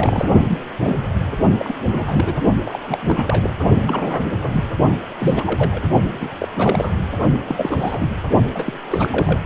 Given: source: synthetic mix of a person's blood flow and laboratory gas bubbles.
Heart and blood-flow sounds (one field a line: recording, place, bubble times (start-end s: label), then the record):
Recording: Doppler ultrasound of blood flow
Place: precordium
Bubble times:
0.00-0.29 s: bubbles
0.49-0.58 s: bubbles
0.79-0.95 s: bubbles
1.59-1.74 s: bubbles
1.89-2.44 s: bubbles
2.63-2.80 s: bubbles
2.82-2.98 s: bubbles
3.00-3.57 s: bubbles
3.87-4.22 s: bubbles
4.43-4.64 s: bubbles
5.20-5.81 s: bubbles
6.12-6.37 s: bubbles
6.40-6.47 s: bubbles
6.53-6.96 s: bubbles
7.47-8.10 s: bubbles
8.54-8.73 s: bubbles
8.88-9.39 s: bubbles
From the record:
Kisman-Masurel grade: 342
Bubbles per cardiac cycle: rolling drumbeat, 9 or more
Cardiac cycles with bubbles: 100%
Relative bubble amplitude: moderate (0.250 to 0.450)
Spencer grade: 3 (all of the cardiac periods contain showers or single bubble signals, but not dominating or overriding the cardiac motion signals)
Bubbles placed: only in the low amplitude regions of the cardiac cycle